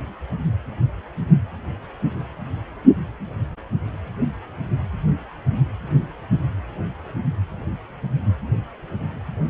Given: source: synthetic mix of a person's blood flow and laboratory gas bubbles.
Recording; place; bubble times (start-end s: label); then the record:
Doppler ultrasound of blood flow; precordium
no bubbles
From the record:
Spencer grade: 0 (complete lack of bubble signals)